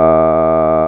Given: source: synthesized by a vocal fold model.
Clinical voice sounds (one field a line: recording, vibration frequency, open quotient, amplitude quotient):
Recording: sustained vowel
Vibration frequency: 80 Hz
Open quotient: 0.2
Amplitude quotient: 1